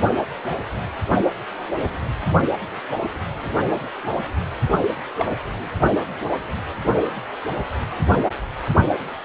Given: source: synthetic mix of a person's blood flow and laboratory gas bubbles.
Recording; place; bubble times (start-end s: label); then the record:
Doppler ultrasound of blood flow; precordium
5.19-5.30 s: bubbles
From the record:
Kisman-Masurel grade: 111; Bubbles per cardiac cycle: 1 to 2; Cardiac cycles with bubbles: 1 to 10%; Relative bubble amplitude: barely perceptible (0.100 to 0.250); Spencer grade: 1 (occasional bubble signal discernible with the cardiac motion signal, with majority of cardiac periods free of bubbles); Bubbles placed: anywhere in the cardiac cycle